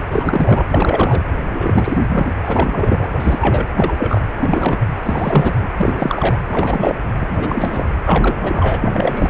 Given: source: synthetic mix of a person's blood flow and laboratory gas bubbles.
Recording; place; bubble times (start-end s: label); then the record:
Doppler ultrasound of blood flow; precordium
0.00-0.02 s: bubbles
0.10-0.64 s: bubbles
0.67-1.21 s: bubbles
1.50-1.98 s: bubbles
2.09-2.33 s: bubbles
2.42-3.12 s: bubbles
3.20-3.67 s: bubbles
3.75-3.92 s: bubbles
3.98-4.21 s: bubbles
4.40-4.89 s: bubbles
5.03-5.54 s: bubbles
5.77-6.38 s: bubbles
6.47-6.99 s: bubbles
7.21-7.86 s: bubbles
8.04-8.78 s: bubbles
8.81-9.30 s: bubbles
From the record:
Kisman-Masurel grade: 332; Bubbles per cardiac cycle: rolling drumbeat, 9 or more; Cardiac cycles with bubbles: 50 to 99%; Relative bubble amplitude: moderate (0.250 to 0.450); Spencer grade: 3 (all of the cardiac periods contain showers or single bubble signals, but not dominating or overriding the cardiac motion signals); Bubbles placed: anywhere in the cardiac cycle